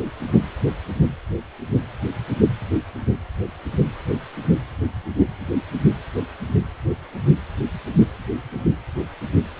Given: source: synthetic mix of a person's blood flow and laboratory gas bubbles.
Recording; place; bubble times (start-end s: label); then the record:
Doppler ultrasound of blood flow; precordium
no bubbles
From the record:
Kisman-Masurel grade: 000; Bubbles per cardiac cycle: 0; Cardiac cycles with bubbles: 0%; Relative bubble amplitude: no bubbles discernible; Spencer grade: 0 (complete lack of bubble signals)